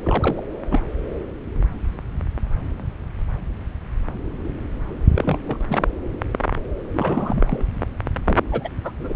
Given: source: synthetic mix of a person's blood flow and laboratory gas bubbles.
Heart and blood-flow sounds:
Doppler ultrasound of blood flow; subclavian vein
0.03-0.46 s: bubbles
0.70-0.81 s: bubbles
5.15-5.38 s: bubbles
5.46-5.58 s: bubbles
5.68-5.83 s: bubbles
6.93-7.65 s: bubbles
8.26-8.38 s: bubbles
8.50-8.69 s: bubbles
8.83-8.91 s: bubbles
8.99-9.14 s: bubbles
From the record:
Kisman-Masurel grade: 222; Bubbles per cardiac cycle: several, 3 to 8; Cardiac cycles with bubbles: 10 to 50%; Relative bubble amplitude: moderate (0.250 to 0.450); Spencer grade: 2 (many but less than half of the cardiac periods contain bubble signals, singularly or in groups); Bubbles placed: anywhere in the cardiac cycle

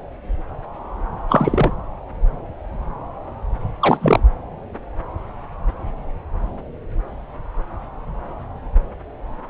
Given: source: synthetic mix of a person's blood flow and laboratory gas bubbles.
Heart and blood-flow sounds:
Doppler ultrasound of blood flow; subclavian vein
1.28-1.71 s: bubbles
3.80-4.20 s: bubbles
From the record:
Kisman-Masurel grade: 213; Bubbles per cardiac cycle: several, 3 to 8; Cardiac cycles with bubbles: 1 to 10%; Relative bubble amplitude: loud (0.450 to 0.775); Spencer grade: 1 (occasional bubble signal discernible with the cardiac motion signal, with majority of cardiac periods free of bubbles); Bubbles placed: anywhere in the cardiac cycle

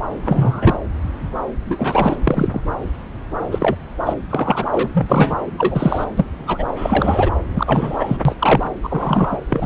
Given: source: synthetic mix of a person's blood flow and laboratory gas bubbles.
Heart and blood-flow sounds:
Doppler ultrasound of blood flow; subclavian vein
0.25-0.81 s: bubbles
1.66-2.16 s: bubbles
2.19-2.68 s: bubbles
3.51-3.75 s: bubbles
4.05-4.14 s: bubbles
4.29-4.65 s: bubbles
4.71-4.89 s: bubbles
4.93-5.35 s: bubbles
5.58-6.05 s: bubbles
6.17-6.25 s: bubbles
6.46-6.66 s: bubbles
6.76-7.30 s: bubbles
7.50-8.18 s: bubbles
8.25-8.36 s: bubbles
8.39-8.67 s: bubbles
8.84-9.39 s: bubbles
9.49-9.66 s: bubbles
From the record:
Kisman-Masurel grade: 233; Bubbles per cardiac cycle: several, 3 to 8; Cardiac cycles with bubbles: 50 to 99%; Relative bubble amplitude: loud (0.450 to 0.775); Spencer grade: 3 (all of the cardiac periods contain showers or single bubble signals, but not dominating or overriding the cardiac motion signals); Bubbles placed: anywhere in the cardiac cycle

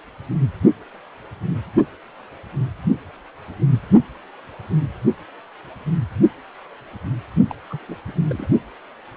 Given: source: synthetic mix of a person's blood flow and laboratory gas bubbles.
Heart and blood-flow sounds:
Doppler ultrasound of blood flow; precordium
7.50-7.55 s: bubbles
7.70-7.79 s: bubbles
7.88-7.97 s: bubbles
8.07-8.12 s: bubbles
8.25-8.49 s: bubbles
From the record:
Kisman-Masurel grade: 211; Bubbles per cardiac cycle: several, 3 to 8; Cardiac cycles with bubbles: 1 to 10%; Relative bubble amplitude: barely perceptible (0.100 to 0.250); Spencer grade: 1 (occasional bubble signal discernible with the cardiac motion signal, with majority of cardiac periods free of bubbles); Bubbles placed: only in the low amplitude regions of the cardiac cycle

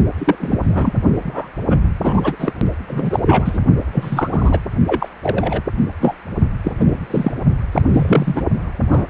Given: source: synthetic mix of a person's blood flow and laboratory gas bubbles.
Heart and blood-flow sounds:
Doppler ultrasound of blood flow; precordium
0.18-0.36 s: bubbles
0.40-0.58 s: bubbles
0.62-0.93 s: bubbles
1.18-1.51 s: bubbles
1.70-1.77 s: bubbles
2.00-2.36 s: bubbles
2.39-2.53 s: bubbles
2.87-3.20 s: bubbles
3.25-3.60 s: bubbles
3.92-4.60 s: bubbles
4.87-5.08 s: bubbles
5.22-5.62 s: bubbles
6.00-6.15 s: bubbles
6.64-7.08 s: bubbles
7.10-7.32 s: bubbles
7.73-7.82 s: bubbles
7.93-8.43 s: bubbles
8.90-9.06 s: bubbles
From the record:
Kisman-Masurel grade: 243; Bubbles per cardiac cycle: several, 3 to 8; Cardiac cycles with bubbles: 100%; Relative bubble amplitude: loud (0.450 to 0.775); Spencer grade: 3 (all of the cardiac periods contain showers or single bubble signals, but not dominating or overriding the cardiac motion signals); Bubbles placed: only in the low amplitude regions of the cardiac cycle

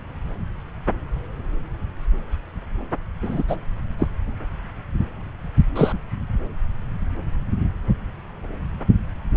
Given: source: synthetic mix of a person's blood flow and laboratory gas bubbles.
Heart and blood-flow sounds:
Doppler ultrasound of blood flow; subclavian vein
3.21-3.42 s: bubbles
3.47-3.56 s: bubbles
3.98-4.06 s: bubbles
5.75-5.92 s: bubbles
From the record:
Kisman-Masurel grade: 123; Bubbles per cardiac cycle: 1 to 2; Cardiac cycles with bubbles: 10 to 50%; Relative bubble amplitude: loud (0.450 to 0.775); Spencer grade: 2 (many but less than half of the cardiac periods contain bubble signals, singularly or in groups); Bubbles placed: anywhere in the cardiac cycle

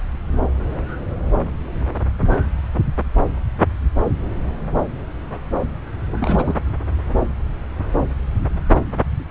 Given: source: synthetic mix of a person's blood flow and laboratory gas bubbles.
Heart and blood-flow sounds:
Doppler ultrasound of blood flow; subclavian vein
6.07-6.56 s: bubbles
From the record:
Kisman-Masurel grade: 221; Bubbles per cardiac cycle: several, 3 to 8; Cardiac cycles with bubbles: 10 to 50%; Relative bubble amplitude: barely perceptible (0.100 to 0.250); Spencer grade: 2 (many but less than half of the cardiac periods contain bubble signals, singularly or in groups); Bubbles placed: anywhere in the cardiac cycle

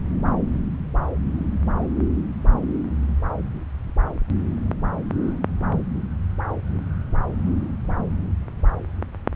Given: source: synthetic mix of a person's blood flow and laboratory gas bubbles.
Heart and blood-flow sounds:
Doppler ultrasound of blood flow; subclavian vein
no bubbles
From the record:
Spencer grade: 0 (complete lack of bubble signals)

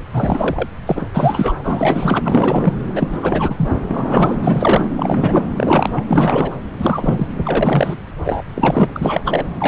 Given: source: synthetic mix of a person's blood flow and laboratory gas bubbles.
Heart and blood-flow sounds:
Doppler ultrasound of blood flow; subclavian vein
0.11-0.68 s: bubbles
0.86-1.07 s: bubbles
1.14-1.54 s: bubbles
1.62-2.73 s: bubbles
2.95-3.69 s: bubbles
3.90-4.35 s: bubbles
4.42-4.85 s: bubbles
4.96-5.45 s: bubbles
5.57-6.04 s: bubbles
6.08-6.53 s: bubbles
6.79-7.28 s: bubbles
7.43-7.97 s: bubbles
8.25-8.44 s: bubbles
8.55-8.92 s: bubbles
8.96-9.47 s: bubbles
9.58-9.67 s: bubbles
From the record:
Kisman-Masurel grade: 333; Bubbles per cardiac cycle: rolling drumbeat, 9 or more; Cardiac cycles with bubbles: 50 to 99%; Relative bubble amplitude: loud (0.450 to 0.775); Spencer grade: 3 (all of the cardiac periods contain showers or single bubble signals, but not dominating or overriding the cardiac motion signals); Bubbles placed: anywhere in the cardiac cycle

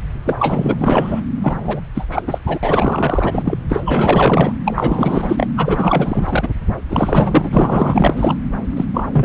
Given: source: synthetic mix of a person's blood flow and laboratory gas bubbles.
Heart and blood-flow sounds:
Doppler ultrasound of blood flow; subclavian vein
0.25-1.21 s: bubbles
1.43-1.56 s: bubbles
1.65-1.81 s: bubbles
1.94-2.08 s: bubbles
2.10-2.23 s: bubbles
2.26-2.38 s: bubbles
2.46-2.58 s: bubbles
2.62-3.58 s: bubbles
3.69-4.54 s: bubbles
4.65-5.47 s: bubbles
5.57-6.49 s: bubbles
6.89-8.35 s: bubbles
8.76-8.86 s: bubbles
8.94-9.09 s: bubbles
9.11-9.25 s: bubbles
From the record:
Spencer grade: 4 (maximum detectable bubble signal sounding continuously throughout systole and diastole of every cardiac period, and overriding the amplitude of the normal cardiac signals); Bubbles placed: anywhere in the cardiac cycle

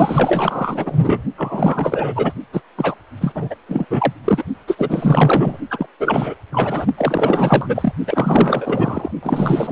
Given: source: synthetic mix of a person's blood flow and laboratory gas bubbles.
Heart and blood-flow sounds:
Doppler ultrasound of blood flow; precordium
0.00-1.23 s: bubbles
1.37-2.33 s: bubbles
2.53-2.62 s: bubbles
2.77-2.95 s: bubbles
3.21-3.56 s: bubbles
3.68-3.85 s: bubbles
3.90-4.13 s: bubbles
4.25-4.45 s: bubbles
4.67-5.58 s: bubbles
5.70-5.87 s: bubbles
6.00-6.34 s: bubbles
6.52-6.86 s: bubbles
6.98-7.93 s: bubbles
8.07-9.11 s: bubbles
9.22-9.72 s: bubbles
From the record:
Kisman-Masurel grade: 444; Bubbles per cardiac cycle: continuous sound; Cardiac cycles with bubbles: 100%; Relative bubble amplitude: maximal (0.775 to 0.999); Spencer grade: 4 (maximum detectable bubble signal sounding continuously throughout systole and diastole of every cardiac period, and overriding the amplitude of the normal cardiac signals); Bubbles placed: only in the low amplitude regions of the cardiac cycle

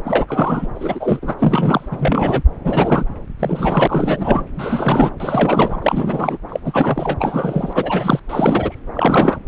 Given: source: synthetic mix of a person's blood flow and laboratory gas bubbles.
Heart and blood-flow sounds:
Doppler ultrasound of blood flow; subclavian vein
0.05-0.67 s: bubbles
0.74-1.19 s: bubbles
1.22-1.33 s: bubbles
1.39-1.89 s: bubbles
1.91-2.43 s: bubbles
2.64-3.05 s: bubbles
3.39-4.44 s: bubbles
4.55-5.10 s: bubbles
5.19-6.38 s: bubbles
6.48-6.60 s: bubbles
6.64-8.20 s: bubbles
8.29-8.79 s: bubbles
8.94-9.39 s: bubbles
From the record:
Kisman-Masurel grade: 343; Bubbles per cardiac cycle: rolling drumbeat, 9 or more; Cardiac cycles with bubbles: 100%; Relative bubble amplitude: loud (0.450 to 0.775); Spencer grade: 3 (all of the cardiac periods contain showers or single bubble signals, but not dominating or overriding the cardiac motion signals); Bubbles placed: anywhere in the cardiac cycle

